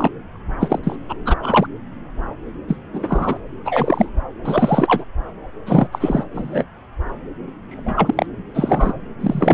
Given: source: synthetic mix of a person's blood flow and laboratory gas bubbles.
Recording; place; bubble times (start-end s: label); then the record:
Doppler ultrasound of blood flow; subclavian vein
0.00-0.10 s: bubbles
0.60-0.80 s: bubbles
0.83-0.95 s: bubbles
1.08-1.15 s: bubbles
1.25-1.35 s: bubbles
1.43-1.67 s: bubbles
2.68-2.76 s: bubbles
2.93-3.37 s: bubbles
3.65-4.10 s: bubbles
4.43-5.04 s: bubbles
5.66-5.88 s: bubbles
5.92-6.24 s: bubbles
6.33-6.64 s: bubbles
7.69-8.26 s: bubbles
8.54-8.94 s: bubbles
9.21-9.54 s: bubbles
From the record:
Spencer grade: 3 (all of the cardiac periods contain showers or single bubble signals, but not dominating or overriding the cardiac motion signals); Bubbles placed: anywhere in the cardiac cycle